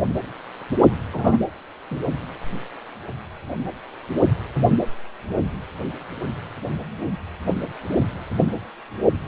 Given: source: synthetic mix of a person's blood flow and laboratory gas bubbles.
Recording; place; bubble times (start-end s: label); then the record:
Doppler ultrasound of blood flow; precordium
1.13-1.38 s: bubbles
1.90-1.97 s: bubbles
From the record:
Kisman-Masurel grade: 212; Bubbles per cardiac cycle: several, 3 to 8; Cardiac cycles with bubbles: 1 to 10%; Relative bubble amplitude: moderate (0.250 to 0.450); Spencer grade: 1 (occasional bubble signal discernible with the cardiac motion signal, with majority of cardiac periods free of bubbles); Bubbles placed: only in the low amplitude regions of the cardiac cycle